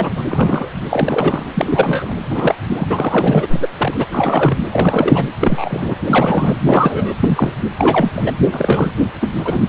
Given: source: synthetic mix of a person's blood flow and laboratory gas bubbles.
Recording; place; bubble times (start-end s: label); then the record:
Doppler ultrasound of blood flow; precordium
0.00-0.71 s: bubbles
0.89-1.44 s: bubbles
1.54-2.14 s: bubbles
2.30-2.55 s: bubbles
2.69-2.87 s: bubbles
2.90-3.48 s: bubbles
3.50-3.68 s: bubbles
3.77-4.05 s: bubbles
4.10-4.57 s: bubbles
4.71-5.26 s: bubbles
5.40-5.95 s: bubbles
6.07-6.56 s: bubbles
6.65-7.13 s: bubbles
7.20-7.52 s: bubbles
7.77-8.11 s: bubbles
8.16-8.33 s: bubbles
8.51-8.91 s: bubbles
9.21-9.32 s: bubbles
9.37-9.62 s: bubbles
From the record:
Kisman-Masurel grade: 243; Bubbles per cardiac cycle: several, 3 to 8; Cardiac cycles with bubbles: 100%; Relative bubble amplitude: loud (0.450 to 0.775); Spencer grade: 3 (all of the cardiac periods contain showers or single bubble signals, but not dominating or overriding the cardiac motion signals); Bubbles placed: anywhere in the cardiac cycle